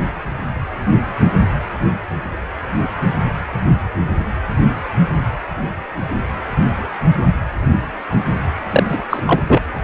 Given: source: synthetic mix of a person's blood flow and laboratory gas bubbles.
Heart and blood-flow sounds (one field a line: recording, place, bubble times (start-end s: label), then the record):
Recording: Doppler ultrasound of blood flow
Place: precordium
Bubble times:
8.71-9.03 s: bubbles
9.09-9.20 s: bubbles
9.25-9.39 s: bubbles
9.47-9.62 s: bubbles
From the record:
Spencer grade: 1 (occasional bubble signal discernible with the cardiac motion signal, with majority of cardiac periods free of bubbles)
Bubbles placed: anywhere in the cardiac cycle